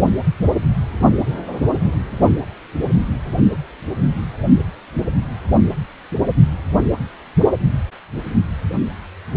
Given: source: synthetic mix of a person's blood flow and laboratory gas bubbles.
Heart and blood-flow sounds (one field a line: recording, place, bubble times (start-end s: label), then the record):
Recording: Doppler ultrasound of blood flow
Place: precordium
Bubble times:
no bubbles
From the record:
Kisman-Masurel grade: 000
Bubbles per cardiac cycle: 0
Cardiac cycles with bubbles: 0%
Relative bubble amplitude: no bubbles discernible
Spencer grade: 0 (complete lack of bubble signals)